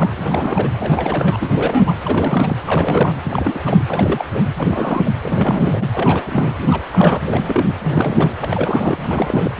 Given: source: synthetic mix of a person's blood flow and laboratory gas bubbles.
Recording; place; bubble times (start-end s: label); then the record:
Doppler ultrasound of blood flow; precordium
0.00-0.11 s: bubbles
0.17-0.70 s: bubbles
0.79-1.93 s: bubbles
2.03-2.56 s: bubbles
2.65-3.13 s: bubbles
3.23-3.61 s: bubbles
3.65-3.82 s: bubbles
3.88-4.25 s: bubbles
4.33-4.42 s: bubbles
4.58-5.12 s: bubbles
5.23-5.87 s: bubbles
5.92-6.58 s: bubbles
6.62-6.82 s: bubbles
6.91-7.20 s: bubbles
7.22-7.73 s: bubbles
7.83-8.35 s: bubbles
8.41-8.98 s: bubbles
9.01-9.51 s: bubbles
From the record:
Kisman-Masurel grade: 332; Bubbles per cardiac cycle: rolling drumbeat, 9 or more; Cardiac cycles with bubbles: 50 to 99%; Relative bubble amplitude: moderate (0.250 to 0.450); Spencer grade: 3 (all of the cardiac periods contain showers or single bubble signals, but not dominating or overriding the cardiac motion signals); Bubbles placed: anywhere in the cardiac cycle